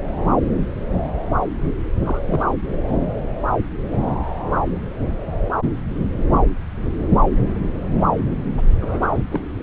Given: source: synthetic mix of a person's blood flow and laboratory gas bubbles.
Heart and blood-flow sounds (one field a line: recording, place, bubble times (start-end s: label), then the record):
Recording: Doppler ultrasound of blood flow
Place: subclavian vein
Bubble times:
2.02-2.20 s: bubbles
2.25-2.45 s: bubbles
8.58-8.62 s: bubbles
8.82-9.23 s: bubbles
9.32-9.40 s: bubbles
From the record:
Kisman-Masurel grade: 222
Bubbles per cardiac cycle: several, 3 to 8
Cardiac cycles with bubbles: 10 to 50%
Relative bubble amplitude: moderate (0.250 to 0.450)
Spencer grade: 2 (many but less than half of the cardiac periods contain bubble signals, singularly or in groups)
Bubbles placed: anywhere in the cardiac cycle